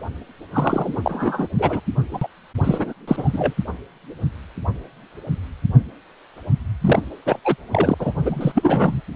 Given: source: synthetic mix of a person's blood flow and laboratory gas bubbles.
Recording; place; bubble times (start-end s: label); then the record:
Doppler ultrasound of blood flow; precordium
0.52-1.48 s: bubbles
1.58-1.81 s: bubbles
2.12-2.28 s: bubbles
2.64-2.93 s: bubbles
3.08-3.54 s: bubbles
6.81-7.03 s: bubbles
7.25-7.40 s: bubbles
7.45-7.56 s: bubbles
7.73-7.94 s: bubbles
7.99-8.12 s: bubbles
8.21-9.01 s: bubbles
From the record:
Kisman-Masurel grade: 333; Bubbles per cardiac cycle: rolling drumbeat, 9 or more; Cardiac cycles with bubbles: 50 to 99%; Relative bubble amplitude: loud (0.450 to 0.775); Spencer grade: 3 (all of the cardiac periods contain showers or single bubble signals, but not dominating or overriding the cardiac motion signals); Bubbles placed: anywhere in the cardiac cycle